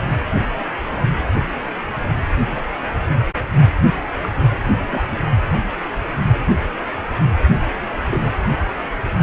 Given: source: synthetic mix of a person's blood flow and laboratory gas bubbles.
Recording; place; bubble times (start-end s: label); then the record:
Doppler ultrasound of blood flow; precordium
4.22-4.30 s: bubbles
4.89-5.04 s: bubbles
8.11-8.36 s: bubbles
From the record:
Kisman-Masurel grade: 122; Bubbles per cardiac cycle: 1 to 2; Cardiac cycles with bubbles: 10 to 50%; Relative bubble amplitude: moderate (0.250 to 0.450); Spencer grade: 2 (many but less than half of the cardiac periods contain bubble signals, singularly or in groups); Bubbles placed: only in the low amplitude regions of the cardiac cycle